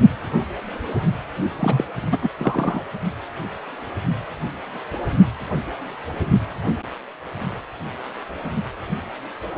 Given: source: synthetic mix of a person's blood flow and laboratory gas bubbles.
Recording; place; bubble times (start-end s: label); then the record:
Doppler ultrasound of blood flow; precordium
1.59-1.84 s: bubbles
2.11-2.18 s: bubbles
2.21-2.29 s: bubbles
2.38-2.83 s: bubbles
From the record:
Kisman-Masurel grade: 212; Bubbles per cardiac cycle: several, 3 to 8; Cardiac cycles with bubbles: 1 to 10%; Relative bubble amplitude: moderate (0.250 to 0.450); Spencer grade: 1 (occasional bubble signal discernible with the cardiac motion signal, with majority of cardiac periods free of bubbles); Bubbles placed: only in the low amplitude regions of the cardiac cycle